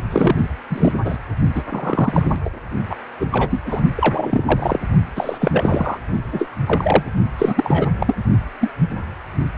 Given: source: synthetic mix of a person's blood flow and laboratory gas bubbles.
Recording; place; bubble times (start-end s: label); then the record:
Doppler ultrasound of blood flow; precordium
0.10-0.46 s: bubbles
0.70-0.93 s: bubbles
1.04-1.17 s: bubbles
1.55-1.62 s: bubbles
1.69-2.36 s: bubbles
2.44-2.49 s: bubbles
2.90-2.96 s: bubbles
3.19-3.27 s: bubbles
3.31-3.62 s: bubbles
3.65-3.83 s: bubbles
3.95-4.44 s: bubbles
4.46-4.79 s: bubbles
5.16-5.97 s: bubbles
6.32-6.49 s: bubbles
6.66-7.03 s: bubbles
7.38-7.89 s: bubbles
8.00-8.17 s: bubbles
8.61-8.70 s: bubbles
From the record:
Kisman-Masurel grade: 233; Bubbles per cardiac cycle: several, 3 to 8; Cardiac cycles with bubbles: 50 to 99%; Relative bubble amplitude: loud (0.450 to 0.775); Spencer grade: 3 (all of the cardiac periods contain showers or single bubble signals, but not dominating or overriding the cardiac motion signals); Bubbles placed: only in the low amplitude regions of the cardiac cycle